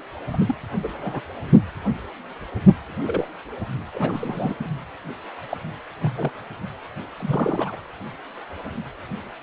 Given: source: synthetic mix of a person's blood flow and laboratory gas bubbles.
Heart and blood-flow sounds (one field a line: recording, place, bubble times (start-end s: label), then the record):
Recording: Doppler ultrasound of blood flow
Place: precordium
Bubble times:
0.32-0.38 s: bubbles
0.46-0.56 s: bubbles
0.83-1.21 s: bubbles
3.05-3.29 s: bubbles
3.94-4.71 s: bubbles
5.49-5.57 s: bubbles
6.01-6.31 s: bubbles
7.16-7.75 s: bubbles
From the record:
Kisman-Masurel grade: 232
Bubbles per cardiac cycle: several, 3 to 8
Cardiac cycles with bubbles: 50 to 99%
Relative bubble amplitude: moderate (0.250 to 0.450)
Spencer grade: 3 (all of the cardiac periods contain showers or single bubble signals, but not dominating or overriding the cardiac motion signals)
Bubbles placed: anywhere in the cardiac cycle